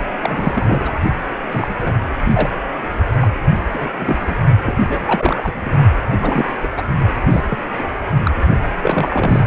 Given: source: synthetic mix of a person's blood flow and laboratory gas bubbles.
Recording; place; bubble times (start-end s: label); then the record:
Doppler ultrasound of blood flow; precordium
0.21-0.92 s: bubbles
1.51-1.95 s: bubbles
2.24-2.49 s: bubbles
3.21-3.30 s: bubbles
3.72-3.89 s: bubbles
4.00-4.35 s: bubbles
4.62-4.77 s: bubbles
4.88-5.72 s: bubbles
6.12-6.55 s: bubbles
6.62-6.67 s: bubbles
6.77-6.83 s: bubbles
7.29-7.42 s: bubbles
7.50-7.58 s: bubbles
7.79-7.83 s: bubbles
8.24-8.31 s: bubbles
8.82-9.44 s: bubbles
From the record:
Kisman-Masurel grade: 242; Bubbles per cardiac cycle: several, 3 to 8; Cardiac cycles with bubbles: 100%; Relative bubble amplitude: moderate (0.250 to 0.450); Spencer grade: 3 (all of the cardiac periods contain showers or single bubble signals, but not dominating or overriding the cardiac motion signals); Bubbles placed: only in the low amplitude regions of the cardiac cycle